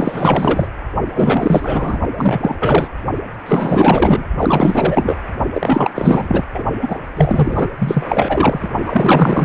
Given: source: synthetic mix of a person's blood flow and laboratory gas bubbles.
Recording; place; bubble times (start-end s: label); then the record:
Doppler ultrasound of blood flow; precordium
0.00-0.67 s: bubbles
1.15-1.99 s: bubbles
2.16-2.89 s: bubbles
3.46-4.24 s: bubbles
4.39-5.17 s: bubbles
5.54-5.93 s: bubbles
5.95-6.44 s: bubbles
6.54-6.64 s: bubbles
6.82-6.99 s: bubbles
7.16-7.70 s: bubbles
7.78-8.71 s: bubbles
8.86-9.44 s: bubbles
From the record:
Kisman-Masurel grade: 444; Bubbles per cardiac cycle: continuous sound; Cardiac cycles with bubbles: 100%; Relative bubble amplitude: maximal (0.775 to 0.999); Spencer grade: 4 (maximum detectable bubble signal sounding continuously throughout systole and diastole of every cardiac period, and overriding the amplitude of the normal cardiac signals); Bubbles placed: only in the low amplitude regions of the cardiac cycle